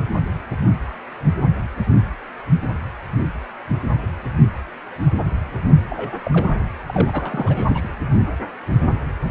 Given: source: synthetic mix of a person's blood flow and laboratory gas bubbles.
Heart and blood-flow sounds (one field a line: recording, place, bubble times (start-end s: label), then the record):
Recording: Doppler ultrasound of blood flow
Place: precordium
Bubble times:
5.90-6.16 s: bubbles
6.25-6.54 s: bubbles
6.87-7.89 s: bubbles
From the record:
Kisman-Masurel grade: 212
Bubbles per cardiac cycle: several, 3 to 8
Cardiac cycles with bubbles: 1 to 10%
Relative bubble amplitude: moderate (0.250 to 0.450)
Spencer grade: 1 (occasional bubble signal discernible with the cardiac motion signal, with majority of cardiac periods free of bubbles)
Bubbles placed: anywhere in the cardiac cycle